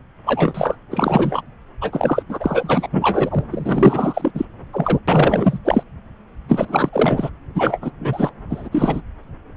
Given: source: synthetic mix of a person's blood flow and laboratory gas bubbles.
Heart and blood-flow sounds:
Doppler ultrasound of blood flow; subclavian vein
0.25-0.76 s: bubbles
0.91-1.42 s: bubbles
1.81-2.23 s: bubbles
2.29-2.88 s: bubbles
2.92-3.45 s: bubbles
3.51-4.32 s: bubbles
4.34-4.45 s: bubbles
4.73-4.99 s: bubbles
5.08-5.59 s: bubbles
5.65-5.83 s: bubbles
6.48-7.30 s: bubbles
7.54-7.91 s: bubbles
8.00-8.34 s: bubbles
8.50-8.69 s: bubbles
8.71-9.01 s: bubbles
From the record:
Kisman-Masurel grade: 444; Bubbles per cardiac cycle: continuous sound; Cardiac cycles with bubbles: 100%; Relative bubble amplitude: maximal (0.775 to 0.999); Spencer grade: 4 (maximum detectable bubble signal sounding continuously throughout systole and diastole of every cardiac period, and overriding the amplitude of the normal cardiac signals); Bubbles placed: anywhere in the cardiac cycle

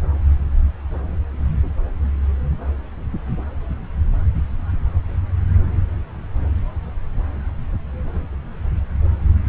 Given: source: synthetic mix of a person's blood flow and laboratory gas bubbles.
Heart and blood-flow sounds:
Doppler ultrasound of blood flow; subclavian vein
no bubbles
From the record:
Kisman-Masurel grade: 000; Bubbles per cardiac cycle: 0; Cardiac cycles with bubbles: 0%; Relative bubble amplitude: no bubbles discernible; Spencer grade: 0 (complete lack of bubble signals)

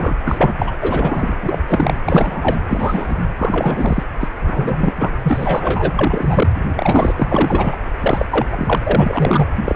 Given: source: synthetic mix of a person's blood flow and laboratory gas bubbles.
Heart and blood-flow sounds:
Doppler ultrasound of blood flow; precordium
0.00-0.16 s: bubbles
0.25-0.73 s: bubbles
0.81-1.35 s: bubbles
1.43-1.58 s: bubbles
1.67-1.94 s: bubbles
2.06-2.56 s: bubbles
2.69-3.25 s: bubbles
3.38-4.04 s: bubbles
4.20-4.28 s: bubbles
4.46-5.11 s: bubbles
5.23-5.95 s: bubbles
5.98-6.52 s: bubbles
6.65-7.76 s: bubbles
7.98-8.25 s: bubbles
8.29-8.47 s: bubbles
8.51-8.77 s: bubbles
8.83-9.48 s: bubbles
9.64-9.75 s: bubbles
From the record:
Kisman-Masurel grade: 343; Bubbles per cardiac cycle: rolling drumbeat, 9 or more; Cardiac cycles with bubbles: 100%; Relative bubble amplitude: loud (0.450 to 0.775); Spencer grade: 3 (all of the cardiac periods contain showers or single bubble signals, but not dominating or overriding the cardiac motion signals); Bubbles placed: anywhere in the cardiac cycle

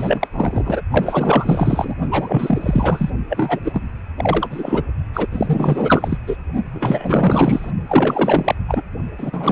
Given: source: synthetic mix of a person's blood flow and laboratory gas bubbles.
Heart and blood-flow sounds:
Doppler ultrasound of blood flow; precordium
0.00-0.27 s: bubbles
0.32-0.81 s: bubbles
0.91-1.95 s: bubbles
2.11-3.11 s: bubbles
3.29-3.60 s: bubbles
3.64-3.83 s: bubbles
4.17-4.83 s: bubbles
5.13-5.28 s: bubbles
5.32-6.17 s: bubbles
6.27-6.37 s: bubbles
6.74-7.71 s: bubbles
7.88-8.55 s: bubbles
8.67-8.83 s: bubbles
9.18-9.51 s: bubbles
From the record:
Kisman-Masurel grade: 444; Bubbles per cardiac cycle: continuous sound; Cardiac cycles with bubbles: 100%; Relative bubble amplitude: maximal (0.775 to 0.999); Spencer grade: 4 (maximum detectable bubble signal sounding continuously throughout systole and diastole of every cardiac period, and overriding the amplitude of the normal cardiac signals); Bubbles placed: only in the low amplitude regions of the cardiac cycle

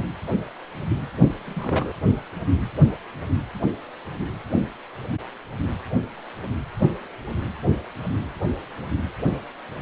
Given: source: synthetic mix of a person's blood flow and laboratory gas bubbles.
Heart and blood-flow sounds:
Doppler ultrasound of blood flow; precordium
1.16-1.32 s: bubbles
1.46-1.92 s: bubbles
From the record:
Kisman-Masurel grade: 222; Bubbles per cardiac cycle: several, 3 to 8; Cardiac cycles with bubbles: 10 to 50%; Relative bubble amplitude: moderate (0.250 to 0.450); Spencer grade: 2 (many but less than half of the cardiac periods contain bubble signals, singularly or in groups); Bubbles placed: anywhere in the cardiac cycle

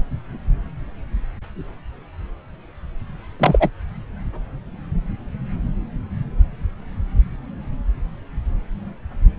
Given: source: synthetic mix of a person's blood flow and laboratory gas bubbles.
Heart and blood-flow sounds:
Doppler ultrasound of blood flow; subclavian vein
3.40-3.69 s: bubbles
From the record:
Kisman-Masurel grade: 213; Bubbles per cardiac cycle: several, 3 to 8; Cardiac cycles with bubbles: 1 to 10%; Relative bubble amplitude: loud (0.450 to 0.775); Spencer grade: 1 (occasional bubble signal discernible with the cardiac motion signal, with majority of cardiac periods free of bubbles); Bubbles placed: anywhere in the cardiac cycle

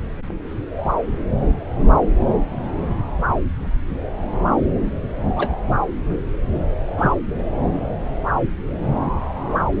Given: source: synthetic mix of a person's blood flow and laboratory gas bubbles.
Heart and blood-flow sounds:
Doppler ultrasound of blood flow; subclavian vein
5.36-5.50 s: bubbles
6.98-7.14 s: bubbles
From the record:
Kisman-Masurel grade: 122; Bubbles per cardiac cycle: 1 to 2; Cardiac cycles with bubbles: 10 to 50%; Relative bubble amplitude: moderate (0.250 to 0.450); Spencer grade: 2 (many but less than half of the cardiac periods contain bubble signals, singularly or in groups); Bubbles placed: anywhere in the cardiac cycle

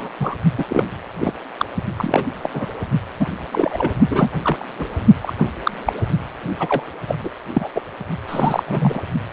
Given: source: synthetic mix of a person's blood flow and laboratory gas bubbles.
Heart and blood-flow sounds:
Doppler ultrasound of blood flow; precordium
0.00-0.09 s: bubbles
0.20-0.34 s: bubbles
0.58-0.65 s: bubbles
0.68-0.83 s: bubbles
1.21-1.33 s: bubbles
1.57-1.66 s: bubbles
1.97-2.26 s: bubbles
2.42-2.50 s: bubbles
2.53-2.66 s: bubbles
3.19-3.26 s: bubbles
3.52-3.92 s: bubbles
4.09-4.29 s: bubbles
4.41-4.65 s: bubbles
4.78-4.87 s: bubbles
5.22-5.33 s: bubbles
5.38-5.46 s: bubbles
5.63-5.71 s: bubbles
5.86-5.93 s: bubbles
6.59-6.83 s: bubbles
7.07-7.15 s: bubbles
7.21-7.30 s: bubbles
7.53-7.69 s: bubbles
7.75-7.81 s: bubbles
8.29-8.63 s: bubbles
8.66-9.04 s: bubbles
From the record:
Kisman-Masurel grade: 243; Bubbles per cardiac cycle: several, 3 to 8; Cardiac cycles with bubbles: 100%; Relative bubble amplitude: loud (0.450 to 0.775); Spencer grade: 3 (all of the cardiac periods contain showers or single bubble signals, but not dominating or overriding the cardiac motion signals); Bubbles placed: only in the low amplitude regions of the cardiac cycle

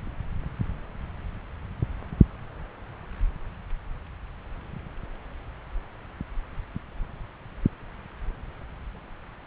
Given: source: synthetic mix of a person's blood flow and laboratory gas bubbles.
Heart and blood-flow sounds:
Doppler ultrasound of blood flow; subclavian vein
no bubbles
From the record:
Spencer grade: 0 (complete lack of bubble signals)

